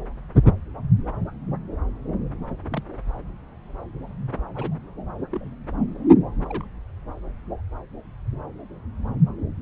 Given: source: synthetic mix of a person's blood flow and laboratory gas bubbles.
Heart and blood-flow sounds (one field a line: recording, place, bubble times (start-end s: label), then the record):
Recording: Doppler ultrasound of blood flow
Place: subclavian vein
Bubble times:
2.71-2.83 s: bubbles
4.54-4.76 s: bubbles
5.31-5.55 s: bubbles
6.46-6.67 s: bubbles
From the record:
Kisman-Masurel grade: 121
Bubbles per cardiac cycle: 1 to 2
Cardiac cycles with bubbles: 10 to 50%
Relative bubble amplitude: barely perceptible (0.100 to 0.250)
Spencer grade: 2 (many but less than half of the cardiac periods contain bubble signals, singularly or in groups)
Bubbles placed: anywhere in the cardiac cycle